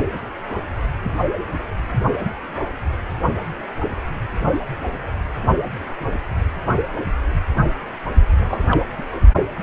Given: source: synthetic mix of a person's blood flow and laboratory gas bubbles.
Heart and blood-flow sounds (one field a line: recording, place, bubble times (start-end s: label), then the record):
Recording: Doppler ultrasound of blood flow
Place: precordium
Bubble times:
8.35-8.81 s: bubbles
8.98-9.04 s: bubbles
From the record:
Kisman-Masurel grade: 211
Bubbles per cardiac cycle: several, 3 to 8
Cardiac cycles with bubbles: 1 to 10%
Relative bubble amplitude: barely perceptible (0.100 to 0.250)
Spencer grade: 1 (occasional bubble signal discernible with the cardiac motion signal, with majority of cardiac periods free of bubbles)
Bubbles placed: only in the low amplitude regions of the cardiac cycle